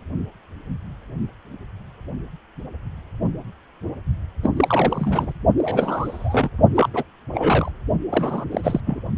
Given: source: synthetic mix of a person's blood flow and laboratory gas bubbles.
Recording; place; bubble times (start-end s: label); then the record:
Doppler ultrasound of blood flow; precordium
4.43-4.51 s: bubbles
4.56-5.33 s: bubbles
5.57-6.50 s: bubbles
6.75-6.89 s: bubbles
6.93-7.04 s: bubbles
7.31-7.71 s: bubbles
8.09-8.45 s: bubbles
8.51-8.80 s: bubbles
8.86-9.02 s: bubbles
From the record:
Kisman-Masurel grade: 332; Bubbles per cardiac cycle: rolling drumbeat, 9 or more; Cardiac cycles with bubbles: 50 to 99%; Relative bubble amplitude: moderate (0.250 to 0.450); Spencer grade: 3 (all of the cardiac periods contain showers or single bubble signals, but not dominating or overriding the cardiac motion signals); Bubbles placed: only in the low amplitude regions of the cardiac cycle